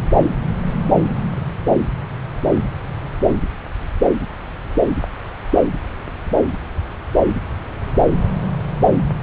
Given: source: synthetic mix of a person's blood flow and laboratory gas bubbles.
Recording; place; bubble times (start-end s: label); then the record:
Doppler ultrasound of blood flow; subclavian vein
no bubbles
From the record:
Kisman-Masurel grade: 000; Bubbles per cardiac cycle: 0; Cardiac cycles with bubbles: 0%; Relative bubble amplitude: no bubbles discernible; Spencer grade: 0 (complete lack of bubble signals)